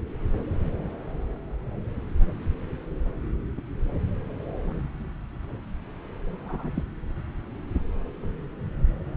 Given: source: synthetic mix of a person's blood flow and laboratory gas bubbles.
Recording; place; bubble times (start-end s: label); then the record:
Doppler ultrasound of blood flow; subclavian vein
3.58-3.61 s: bubbles
6.38-6.70 s: bubbles
6.74-6.83 s: bubbles
From the record:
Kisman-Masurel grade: 121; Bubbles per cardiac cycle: 1 to 2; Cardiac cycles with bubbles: 10 to 50%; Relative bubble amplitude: barely perceptible (0.100 to 0.250); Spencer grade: 2 (many but less than half of the cardiac periods contain bubble signals, singularly or in groups); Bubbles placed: anywhere in the cardiac cycle